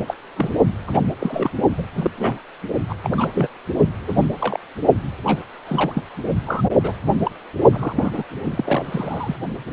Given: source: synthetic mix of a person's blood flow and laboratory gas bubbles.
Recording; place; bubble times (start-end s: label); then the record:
Doppler ultrasound of blood flow; precordium
0.07-0.15 s: bubbles
0.36-0.52 s: bubbles
0.87-0.99 s: bubbles
1.19-1.50 s: bubbles
1.78-1.82 s: bubbles
1.95-2.10 s: bubbles
2.17-2.38 s: bubbles
2.89-2.95 s: bubbles
3.04-3.09 s: bubbles
3.12-3.48 s: bubbles
4.07-4.25 s: bubbles
4.40-4.59 s: bubbles
5.24-5.45 s: bubbles
5.67-6.04 s: bubbles
6.46-6.62 s: bubbles
6.83-6.93 s: bubbles
7.25-7.31 s: bubbles
7.73-8.23 s: bubbles
8.44-9.36 s: bubbles
From the record:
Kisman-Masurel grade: 242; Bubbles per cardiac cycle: several, 3 to 8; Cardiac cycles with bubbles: 100%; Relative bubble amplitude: moderate (0.250 to 0.450); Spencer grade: 3 (all of the cardiac periods contain showers or single bubble signals, but not dominating or overriding the cardiac motion signals); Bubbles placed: only in the low amplitude regions of the cardiac cycle